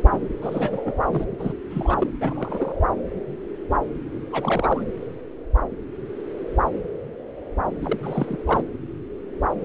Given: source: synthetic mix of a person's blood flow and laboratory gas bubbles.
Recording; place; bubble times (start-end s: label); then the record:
Doppler ultrasound of blood flow; subclavian vein
0.11-0.18 s: bubbles
0.42-0.82 s: bubbles
0.85-0.92 s: bubbles
1.06-1.25 s: bubbles
1.39-1.53 s: bubbles
1.71-2.07 s: bubbles
2.21-2.72 s: bubbles
4.32-4.83 s: bubbles
7.81-8.00 s: bubbles
8.03-8.37 s: bubbles
8.46-8.62 s: bubbles
From the record:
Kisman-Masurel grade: 221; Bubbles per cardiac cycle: several, 3 to 8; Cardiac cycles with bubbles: 10 to 50%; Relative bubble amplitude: barely perceptible (0.100 to 0.250); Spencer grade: 2 (many but less than half of the cardiac periods contain bubble signals, singularly or in groups); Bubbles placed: anywhere in the cardiac cycle